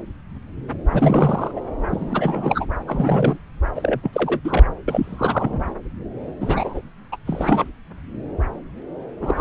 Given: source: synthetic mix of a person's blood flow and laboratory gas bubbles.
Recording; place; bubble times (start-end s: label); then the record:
Doppler ultrasound of blood flow; subclavian vein
0.92-1.51 s: bubbles
1.56-1.61 s: bubbles
1.89-2.65 s: bubbles
2.87-3.39 s: bubbles
3.75-4.01 s: bubbles
4.03-4.39 s: bubbles
4.44-4.63 s: bubbles
4.88-5.60 s: bubbles
6.40-6.81 s: bubbles
7.12-7.16 s: bubbles
7.27-7.68 s: bubbles
9.21-9.41 s: bubbles
From the record:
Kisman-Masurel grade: 332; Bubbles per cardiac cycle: rolling drumbeat, 9 or more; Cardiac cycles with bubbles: 50 to 99%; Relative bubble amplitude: moderate (0.250 to 0.450); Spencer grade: 3 (all of the cardiac periods contain showers or single bubble signals, but not dominating or overriding the cardiac motion signals); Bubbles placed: anywhere in the cardiac cycle